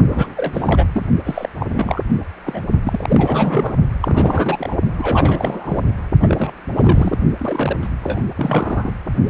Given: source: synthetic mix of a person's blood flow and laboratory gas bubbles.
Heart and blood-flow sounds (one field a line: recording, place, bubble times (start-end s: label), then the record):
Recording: Doppler ultrasound of blood flow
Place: precordium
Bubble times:
0.10-0.34 s: bubbles
0.36-0.85 s: bubbles
0.94-1.05 s: bubbles
1.24-1.49 s: bubbles
1.56-2.02 s: bubbles
2.46-2.62 s: bubbles
2.83-3.76 s: bubbles
4.00-4.75 s: bubbles
4.98-5.85 s: bubbles
6.22-6.52 s: bubbles
6.75-7.17 s: bubbles
7.39-7.76 s: bubbles
7.81-7.88 s: bubbles
8.03-8.21 s: bubbles
8.37-8.92 s: bubbles
From the record:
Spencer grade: 3 (all of the cardiac periods contain showers or single bubble signals, but not dominating or overriding the cardiac motion signals)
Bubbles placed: only in the low amplitude regions of the cardiac cycle